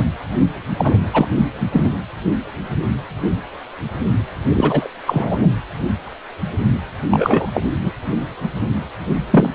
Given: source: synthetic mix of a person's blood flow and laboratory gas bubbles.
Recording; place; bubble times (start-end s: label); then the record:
Doppler ultrasound of blood flow; precordium
0.00-0.05 s: bubbles
0.77-0.98 s: bubbles
1.13-1.26 s: bubbles
1.72-1.90 s: bubbles
4.54-4.88 s: bubbles
5.06-5.50 s: bubbles
7.10-7.50 s: bubbles
7.54-7.62 s: bubbles
7.83-7.92 s: bubbles
9.30-9.49 s: bubbles
From the record:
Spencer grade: 2 (many but less than half of the cardiac periods contain bubble signals, singularly or in groups); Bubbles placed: anywhere in the cardiac cycle